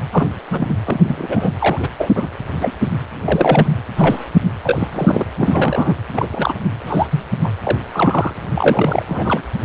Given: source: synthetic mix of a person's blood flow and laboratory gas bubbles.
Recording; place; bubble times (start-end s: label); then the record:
Doppler ultrasound of blood flow; precordium
0.12-0.28 s: bubbles
0.50-0.75 s: bubbles
0.84-1.50 s: bubbles
1.59-1.88 s: bubbles
1.98-2.08 s: bubbles
2.15-2.28 s: bubbles
2.60-2.72 s: bubbles
2.80-2.90 s: bubbles
3.24-3.72 s: bubbles
3.96-4.25 s: bubbles
4.62-4.88 s: bubbles
4.92-5.26 s: bubbles
5.38-5.94 s: bubbles
6.13-6.29 s: bubbles
6.32-6.54 s: bubbles
6.87-7.07 s: bubbles
7.11-7.24 s: bubbles
7.44-7.52 s: bubbles
7.63-7.78 s: bubbles
7.92-8.35 s: bubbles
8.55-9.42 s: bubbles
From the record:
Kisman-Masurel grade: 243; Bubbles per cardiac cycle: several, 3 to 8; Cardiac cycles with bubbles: 100%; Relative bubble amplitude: loud (0.450 to 0.775); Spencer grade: 3 (all of the cardiac periods contain showers or single bubble signals, but not dominating or overriding the cardiac motion signals); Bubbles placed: anywhere in the cardiac cycle